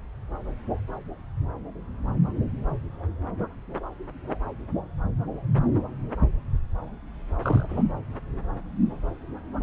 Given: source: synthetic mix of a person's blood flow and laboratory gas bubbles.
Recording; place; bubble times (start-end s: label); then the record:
Doppler ultrasound of blood flow; subclavian vein
7.42-7.84 s: bubbles
From the record:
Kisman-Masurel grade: 211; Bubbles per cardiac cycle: several, 3 to 8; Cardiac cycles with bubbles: 1 to 10%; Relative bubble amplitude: barely perceptible (0.100 to 0.250); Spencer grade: 1 (occasional bubble signal discernible with the cardiac motion signal, with majority of cardiac periods free of bubbles); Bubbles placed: anywhere in the cardiac cycle